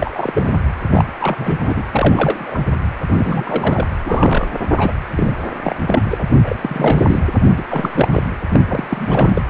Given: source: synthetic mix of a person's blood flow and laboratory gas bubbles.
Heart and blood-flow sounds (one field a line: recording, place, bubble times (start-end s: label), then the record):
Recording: Doppler ultrasound of blood flow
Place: precordium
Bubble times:
0.00-0.09 s: bubbles
0.12-0.59 s: bubbles
0.91-1.05 s: bubbles
1.18-1.57 s: bubbles
1.60-1.83 s: bubbles
1.91-2.58 s: bubbles
3.08-3.87 s: bubbles
4.05-4.48 s: bubbles
4.77-4.94 s: bubbles
5.15-5.33 s: bubbles
5.64-5.75 s: bubbles
5.87-6.02 s: bubbles
6.09-6.24 s: bubbles
6.42-7.21 s: bubbles
7.57-7.63 s: bubbles
7.69-8.08 s: bubbles
8.12-8.22 s: bubbles
8.53-8.59 s: bubbles
8.68-9.42 s: bubbles
From the record:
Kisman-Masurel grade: 342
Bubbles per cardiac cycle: rolling drumbeat, 9 or more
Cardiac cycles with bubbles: 100%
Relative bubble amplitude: moderate (0.250 to 0.450)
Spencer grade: 3 (all of the cardiac periods contain showers or single bubble signals, but not dominating or overriding the cardiac motion signals)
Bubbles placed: anywhere in the cardiac cycle